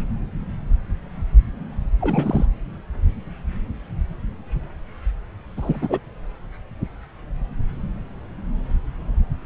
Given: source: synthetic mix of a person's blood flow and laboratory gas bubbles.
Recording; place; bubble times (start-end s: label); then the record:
Doppler ultrasound of blood flow; subclavian vein
2.01-2.46 s: bubbles
5.56-5.99 s: bubbles
From the record:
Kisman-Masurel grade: 212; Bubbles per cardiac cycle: several, 3 to 8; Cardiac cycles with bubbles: 1 to 10%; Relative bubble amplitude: moderate (0.250 to 0.450); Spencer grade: 1 (occasional bubble signal discernible with the cardiac motion signal, with majority of cardiac periods free of bubbles); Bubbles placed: anywhere in the cardiac cycle